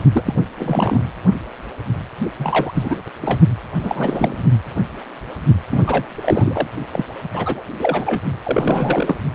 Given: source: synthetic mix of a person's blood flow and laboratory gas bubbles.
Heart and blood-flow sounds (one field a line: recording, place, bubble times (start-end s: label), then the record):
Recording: Doppler ultrasound of blood flow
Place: precordium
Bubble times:
0.12-0.35 s: bubbles
0.59-1.02 s: bubbles
2.38-3.01 s: bubbles
3.22-3.40 s: bubbles
3.83-4.42 s: bubbles
5.71-5.81 s: bubbles
5.87-6.05 s: bubbles
6.15-6.67 s: bubbles
6.92-7.05 s: bubbles
7.31-7.63 s: bubbles
7.75-8.20 s: bubbles
8.44-9.15 s: bubbles
From the record:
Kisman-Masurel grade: 333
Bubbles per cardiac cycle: rolling drumbeat, 9 or more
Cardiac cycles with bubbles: 50 to 99%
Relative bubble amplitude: loud (0.450 to 0.775)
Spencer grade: 3 (all of the cardiac periods contain showers or single bubble signals, but not dominating or overriding the cardiac motion signals)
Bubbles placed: only in the low amplitude regions of the cardiac cycle